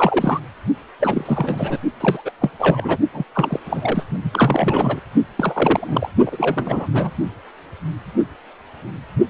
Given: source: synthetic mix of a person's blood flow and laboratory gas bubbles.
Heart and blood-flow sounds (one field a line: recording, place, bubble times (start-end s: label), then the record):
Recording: Doppler ultrasound of blood flow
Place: precordium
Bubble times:
0.00-0.40 s: bubbles
1.00-1.79 s: bubbles
2.00-2.23 s: bubbles
2.25-2.31 s: bubbles
2.41-2.50 s: bubbles
2.58-2.97 s: bubbles
3.13-3.24 s: bubbles
3.34-3.61 s: bubbles
3.66-4.04 s: bubbles
4.24-5.00 s: bubbles
5.37-6.10 s: bubbles
6.25-6.87 s: bubbles
6.93-7.11 s: bubbles
From the record:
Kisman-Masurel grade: 332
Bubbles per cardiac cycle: rolling drumbeat, 9 or more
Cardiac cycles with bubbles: 50 to 99%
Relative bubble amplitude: moderate (0.250 to 0.450)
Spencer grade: 3 (all of the cardiac periods contain showers or single bubble signals, but not dominating or overriding the cardiac motion signals)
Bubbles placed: only in the low amplitude regions of the cardiac cycle